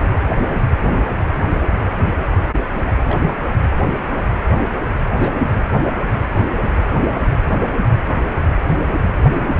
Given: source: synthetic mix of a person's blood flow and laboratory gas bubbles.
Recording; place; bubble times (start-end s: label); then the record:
Doppler ultrasound of blood flow; precordium
3.06-3.20 s: bubbles
5.21-5.29 s: bubbles
5.42-5.50 s: bubbles
8.66-9.11 s: bubbles
From the record:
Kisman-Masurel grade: 121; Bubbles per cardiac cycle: 1 to 2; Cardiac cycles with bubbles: 10 to 50%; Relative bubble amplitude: barely perceptible (0.100 to 0.250); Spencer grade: 2 (many but less than half of the cardiac periods contain bubble signals, singularly or in groups); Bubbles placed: anywhere in the cardiac cycle